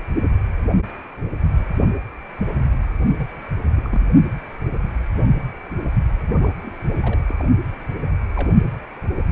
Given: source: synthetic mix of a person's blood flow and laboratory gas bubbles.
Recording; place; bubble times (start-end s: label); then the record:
Doppler ultrasound of blood flow; precordium
2.98-3.27 s: bubbles
3.76-4.01 s: bubbles
6.29-6.52 s: bubbles
6.63-6.71 s: bubbles
6.93-7.20 s: bubbles
7.29-7.33 s: bubbles
7.39-7.43 s: bubbles
8.36-8.50 s: bubbles
From the record:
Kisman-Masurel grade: 221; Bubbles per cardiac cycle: several, 3 to 8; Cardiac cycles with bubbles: 10 to 50%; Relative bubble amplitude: barely perceptible (0.100 to 0.250); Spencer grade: 2 (many but less than half of the cardiac periods contain bubble signals, singularly or in groups); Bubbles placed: only in the low amplitude regions of the cardiac cycle